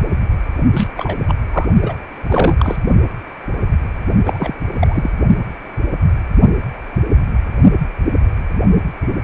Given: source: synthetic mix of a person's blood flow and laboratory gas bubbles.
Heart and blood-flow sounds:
Doppler ultrasound of blood flow; precordium
0.73-0.88 s: bubbles
0.94-1.18 s: bubbles
1.28-1.35 s: bubbles
1.53-1.67 s: bubbles
1.82-1.94 s: bubbles
2.26-2.54 s: bubbles
2.59-2.76 s: bubbles
4.25-4.54 s: bubbles
4.74-5.10 s: bubbles
From the record:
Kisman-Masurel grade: 223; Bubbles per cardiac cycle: several, 3 to 8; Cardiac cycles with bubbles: 10 to 50%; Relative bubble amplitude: loud (0.450 to 0.775); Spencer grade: 2 (many but less than half of the cardiac periods contain bubble signals, singularly or in groups); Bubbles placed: only in the low amplitude regions of the cardiac cycle

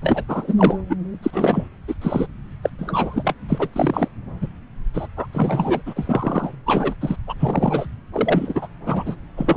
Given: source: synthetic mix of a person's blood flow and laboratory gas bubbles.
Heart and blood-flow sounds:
Doppler ultrasound of blood flow; subclavian vein
0.02-0.24 s: bubbles
0.28-0.55 s: bubbles
0.58-0.77 s: bubbles
0.90-0.96 s: bubbles
1.23-1.67 s: bubbles
1.88-1.94 s: bubbles
2.02-2.26 s: bubbles
2.63-2.69 s: bubbles
2.78-3.34 s: bubbles
3.48-3.68 s: bubbles
3.73-4.08 s: bubbles
4.41-4.47 s: bubbles
4.94-5.07 s: bubbles
5.17-5.26 s: bubbles
5.33-5.82 s: bubbles
5.86-6.51 s: bubbles
6.66-6.94 s: bubbles
7.01-7.16 s: bubbles
7.27-7.34 s: bubbles
7.39-7.86 s: bubbles
8.13-8.67 s: bubbles
8.86-9.15 s: bubbles
9.37-9.57 s: bubbles
From the record:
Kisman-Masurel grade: 342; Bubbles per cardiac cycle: rolling drumbeat, 9 or more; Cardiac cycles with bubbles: 100%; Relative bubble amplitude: moderate (0.250 to 0.450); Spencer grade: 3 (all of the cardiac periods contain showers or single bubble signals, but not dominating or overriding the cardiac motion signals); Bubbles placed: anywhere in the cardiac cycle

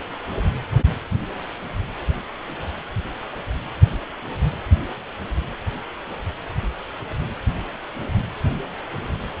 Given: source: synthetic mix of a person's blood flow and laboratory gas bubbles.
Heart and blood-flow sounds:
Doppler ultrasound of blood flow; precordium
no bubbles
From the record:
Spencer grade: 0 (complete lack of bubble signals)

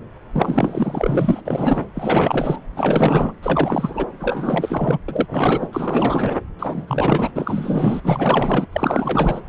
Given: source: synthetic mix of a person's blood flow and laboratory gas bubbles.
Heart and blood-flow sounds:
Doppler ultrasound of blood flow; subclavian vein
0.33-1.41 s: bubbles
1.45-1.86 s: bubbles
1.94-2.59 s: bubbles
2.75-3.33 s: bubbles
3.43-4.05 s: bubbles
4.19-4.98 s: bubbles
5.08-5.69 s: bubbles
5.72-6.37 s: bubbles
6.59-7.31 s: bubbles
7.35-8.67 s: bubbles
8.72-9.41 s: bubbles
From the record:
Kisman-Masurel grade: 444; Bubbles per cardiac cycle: continuous sound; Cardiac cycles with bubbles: 100%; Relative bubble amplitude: maximal (0.775 to 0.999); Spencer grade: 4 (maximum detectable bubble signal sounding continuously throughout systole and diastole of every cardiac period, and overriding the amplitude of the normal cardiac signals); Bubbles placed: anywhere in the cardiac cycle

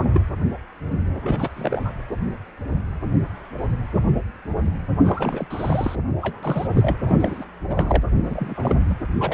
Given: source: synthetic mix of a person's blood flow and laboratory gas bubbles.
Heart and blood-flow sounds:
Doppler ultrasound of blood flow; precordium
0.09-0.20 s: bubbles
1.24-1.49 s: bubbles
1.56-1.95 s: bubbles
5.04-5.47 s: bubbles
5.50-5.96 s: bubbles
6.21-6.96 s: bubbles
7.05-7.44 s: bubbles
7.69-8.03 s: bubbles
8.23-8.75 s: bubbles
8.89-8.95 s: bubbles
9.18-9.34 s: bubbles
From the record:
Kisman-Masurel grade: 332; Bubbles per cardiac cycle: rolling drumbeat, 9 or more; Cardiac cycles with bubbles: 50 to 99%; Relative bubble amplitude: moderate (0.250 to 0.450); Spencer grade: 3 (all of the cardiac periods contain showers or single bubble signals, but not dominating or overriding the cardiac motion signals); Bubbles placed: anywhere in the cardiac cycle

